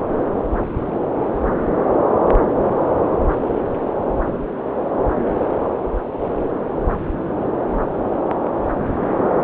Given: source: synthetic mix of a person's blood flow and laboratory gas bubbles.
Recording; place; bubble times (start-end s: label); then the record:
Doppler ultrasound of blood flow; subclavian vein
8.83-8.92 s: bubbles
9.08-9.23 s: bubbles
From the record:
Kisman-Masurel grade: 111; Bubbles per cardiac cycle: 1 to 2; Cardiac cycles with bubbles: 1 to 10%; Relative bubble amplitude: barely perceptible (0.100 to 0.250); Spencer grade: 1 (occasional bubble signal discernible with the cardiac motion signal, with majority of cardiac periods free of bubbles); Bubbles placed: anywhere in the cardiac cycle